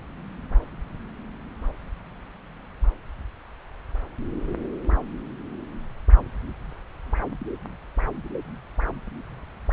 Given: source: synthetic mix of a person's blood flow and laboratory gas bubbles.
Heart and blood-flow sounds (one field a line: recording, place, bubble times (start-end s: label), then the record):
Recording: Doppler ultrasound of blood flow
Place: subclavian vein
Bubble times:
no bubbles
From the record:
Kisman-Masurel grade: 000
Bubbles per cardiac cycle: 0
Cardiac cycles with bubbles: 0%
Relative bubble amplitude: no bubbles discernible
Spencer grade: 0 (complete lack of bubble signals)